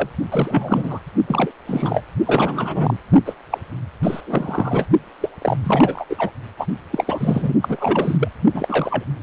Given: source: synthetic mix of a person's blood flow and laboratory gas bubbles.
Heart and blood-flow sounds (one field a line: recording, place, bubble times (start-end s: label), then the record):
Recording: Doppler ultrasound of blood flow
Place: precordium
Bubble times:
0.00-0.10 s: bubbles
0.30-1.00 s: bubbles
1.27-1.51 s: bubbles
1.67-2.02 s: bubbles
2.26-2.97 s: bubbles
3.25-3.33 s: bubbles
3.50-3.58 s: bubbles
4.03-4.21 s: bubbles
4.26-4.85 s: bubbles
5.20-5.29 s: bubbles
5.41-5.57 s: bubbles
5.63-6.05 s: bubbles
6.09-6.15 s: bubbles
6.18-6.31 s: bubbles
6.57-6.67 s: bubbles
6.91-7.54 s: bubbles
7.62-8.28 s: bubbles
8.53-9.04 s: bubbles
From the record:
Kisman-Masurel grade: 343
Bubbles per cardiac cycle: rolling drumbeat, 9 or more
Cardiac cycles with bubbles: 100%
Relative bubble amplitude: loud (0.450 to 0.775)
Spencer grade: 3 (all of the cardiac periods contain showers or single bubble signals, but not dominating or overriding the cardiac motion signals)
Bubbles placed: only in the low amplitude regions of the cardiac cycle